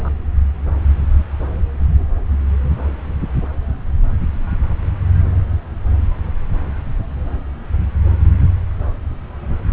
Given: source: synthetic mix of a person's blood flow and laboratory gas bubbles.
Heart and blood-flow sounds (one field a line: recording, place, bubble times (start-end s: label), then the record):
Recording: Doppler ultrasound of blood flow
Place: subclavian vein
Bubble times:
0.00-0.10 s: bubbles
From the record:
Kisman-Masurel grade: 212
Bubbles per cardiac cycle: several, 3 to 8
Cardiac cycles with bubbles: 1 to 10%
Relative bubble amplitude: moderate (0.250 to 0.450)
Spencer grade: 1 (occasional bubble signal discernible with the cardiac motion signal, with majority of cardiac periods free of bubbles)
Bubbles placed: anywhere in the cardiac cycle